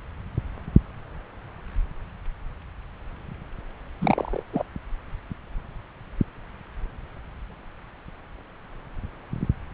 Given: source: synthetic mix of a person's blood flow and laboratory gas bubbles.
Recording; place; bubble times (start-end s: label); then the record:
Doppler ultrasound of blood flow; subclavian vein
4.01-4.43 s: bubbles
4.52-4.64 s: bubbles
From the record:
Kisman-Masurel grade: 212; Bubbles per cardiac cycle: several, 3 to 8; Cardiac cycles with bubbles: 1 to 10%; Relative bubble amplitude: moderate (0.250 to 0.450); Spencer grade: 1 (occasional bubble signal discernible with the cardiac motion signal, with majority of cardiac periods free of bubbles); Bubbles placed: anywhere in the cardiac cycle